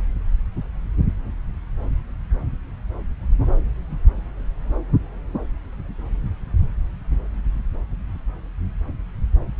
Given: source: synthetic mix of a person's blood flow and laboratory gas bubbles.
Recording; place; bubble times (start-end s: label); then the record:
Doppler ultrasound of blood flow; subclavian vein
no bubbles
From the record:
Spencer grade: 0 (complete lack of bubble signals)